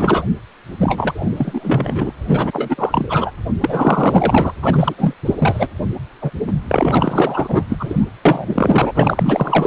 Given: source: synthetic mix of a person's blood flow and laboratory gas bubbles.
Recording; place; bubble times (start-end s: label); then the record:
Doppler ultrasound of blood flow; precordium
0.00-0.23 s: bubbles
0.77-2.12 s: bubbles
2.27-3.32 s: bubbles
3.61-4.53 s: bubbles
4.62-5.13 s: bubbles
5.25-5.33 s: bubbles
5.37-5.67 s: bubbles
6.21-6.31 s: bubbles
6.47-6.53 s: bubbles
6.67-7.63 s: bubbles
7.69-8.06 s: bubbles
8.25-8.91 s: bubbles
8.94-9.67 s: bubbles
From the record:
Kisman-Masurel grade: 444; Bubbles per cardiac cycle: continuous sound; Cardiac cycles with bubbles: 100%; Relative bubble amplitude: maximal (0.775 to 0.999); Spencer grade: 4 (maximum detectable bubble signal sounding continuously throughout systole and diastole of every cardiac period, and overriding the amplitude of the normal cardiac signals); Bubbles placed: anywhere in the cardiac cycle